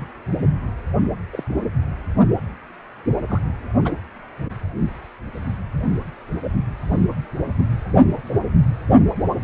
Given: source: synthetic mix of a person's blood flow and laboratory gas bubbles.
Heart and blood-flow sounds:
Doppler ultrasound of blood flow; precordium
1.32-1.44 s: bubbles
3.28-3.41 s: bubbles
3.84-3.93 s: bubbles
7.58-7.62 s: bubbles
From the record:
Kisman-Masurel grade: 121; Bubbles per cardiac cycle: 1 to 2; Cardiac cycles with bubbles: 10 to 50%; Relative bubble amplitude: barely perceptible (0.100 to 0.250); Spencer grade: 2 (many but less than half of the cardiac periods contain bubble signals, singularly or in groups); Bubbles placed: anywhere in the cardiac cycle

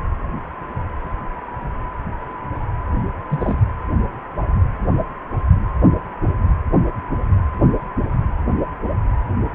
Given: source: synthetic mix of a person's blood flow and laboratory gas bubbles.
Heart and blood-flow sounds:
Doppler ultrasound of blood flow; precordium
3.29-3.56 s: bubbles
From the record:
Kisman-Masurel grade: 112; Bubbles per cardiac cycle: 1 to 2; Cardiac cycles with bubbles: 1 to 10%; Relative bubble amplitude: moderate (0.250 to 0.450); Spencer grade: 1 (occasional bubble signal discernible with the cardiac motion signal, with majority of cardiac periods free of bubbles); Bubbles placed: anywhere in the cardiac cycle

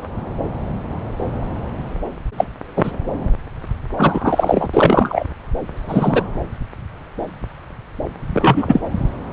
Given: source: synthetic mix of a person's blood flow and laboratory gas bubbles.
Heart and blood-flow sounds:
Doppler ultrasound of blood flow; subclavian vein
2.37-2.44 s: bubbles
2.76-2.92 s: bubbles
3.97-4.69 s: bubbles
4.73-5.23 s: bubbles
5.88-6.23 s: bubbles
8.34-8.80 s: bubbles
From the record:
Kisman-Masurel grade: 233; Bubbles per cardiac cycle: several, 3 to 8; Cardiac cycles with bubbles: 50 to 99%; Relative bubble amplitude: loud (0.450 to 0.775); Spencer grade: 3 (all of the cardiac periods contain showers or single bubble signals, but not dominating or overriding the cardiac motion signals); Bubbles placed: anywhere in the cardiac cycle

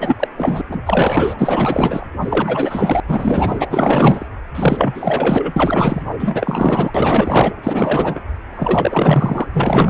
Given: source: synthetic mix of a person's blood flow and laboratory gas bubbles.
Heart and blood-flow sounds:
Doppler ultrasound of blood flow; precordium
0.00-0.16 s: bubbles
0.19-0.28 s: bubbles
0.37-0.61 s: bubbles
0.68-2.06 s: bubbles
2.21-3.00 s: bubbles
3.08-3.66 s: bubbles
3.69-4.27 s: bubbles
4.55-5.53 s: bubbles
5.56-6.03 s: bubbles
6.18-6.92 s: bubbles
6.94-7.51 s: bubbles
7.63-8.21 s: bubbles
8.57-9.48 s: bubbles
9.53-9.90 s: bubbles
From the record:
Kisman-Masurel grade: 444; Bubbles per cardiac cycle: continuous sound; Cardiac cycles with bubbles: 100%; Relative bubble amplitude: maximal (0.775 to 0.999); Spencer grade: 4 (maximum detectable bubble signal sounding continuously throughout systole and diastole of every cardiac period, and overriding the amplitude of the normal cardiac signals); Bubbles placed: anywhere in the cardiac cycle

